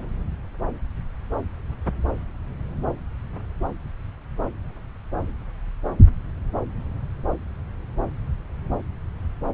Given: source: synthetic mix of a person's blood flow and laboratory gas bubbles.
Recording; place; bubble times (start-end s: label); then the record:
Doppler ultrasound of blood flow; subclavian vein
no bubbles
From the record:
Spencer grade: 0 (complete lack of bubble signals)